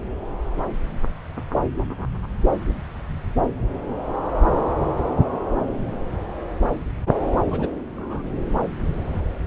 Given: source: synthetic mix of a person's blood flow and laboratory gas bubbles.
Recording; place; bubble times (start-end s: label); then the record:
Doppler ultrasound of blood flow; subclavian vein
7.50-7.70 s: bubbles
7.96-8.22 s: bubbles
From the record:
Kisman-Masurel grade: 221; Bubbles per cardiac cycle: several, 3 to 8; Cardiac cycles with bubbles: 10 to 50%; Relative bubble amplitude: barely perceptible (0.100 to 0.250); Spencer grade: 2 (many but less than half of the cardiac periods contain bubble signals, singularly or in groups); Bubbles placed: anywhere in the cardiac cycle